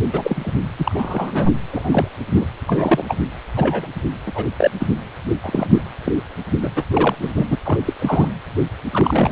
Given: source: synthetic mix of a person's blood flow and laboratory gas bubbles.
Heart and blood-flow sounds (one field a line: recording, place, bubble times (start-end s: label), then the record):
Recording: Doppler ultrasound of blood flow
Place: precordium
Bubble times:
0.12-0.53 s: bubbles
0.78-1.53 s: bubbles
1.70-2.08 s: bubbles
2.30-2.45 s: bubbles
2.67-3.04 s: bubbles
3.08-3.17 s: bubbles
3.56-3.88 s: bubbles
4.26-4.46 s: bubbles
4.57-4.71 s: bubbles
4.79-4.88 s: bubbles
5.43-5.67 s: bubbles
5.71-5.82 s: bubbles
6.04-6.12 s: bubbles
6.60-6.71 s: bubbles
6.75-6.83 s: bubbles
6.93-7.16 s: bubbles
7.21-7.33 s: bubbles
7.36-7.46 s: bubbles
7.50-7.56 s: bubbles
7.64-7.79 s: bubbles
7.85-7.93 s: bubbles
7.99-8.32 s: bubbles
8.91-9.32 s: bubbles
From the record:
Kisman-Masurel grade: 243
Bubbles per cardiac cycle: several, 3 to 8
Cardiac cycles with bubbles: 100%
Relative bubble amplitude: loud (0.450 to 0.775)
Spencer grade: 3 (all of the cardiac periods contain showers or single bubble signals, but not dominating or overriding the cardiac motion signals)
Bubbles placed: anywhere in the cardiac cycle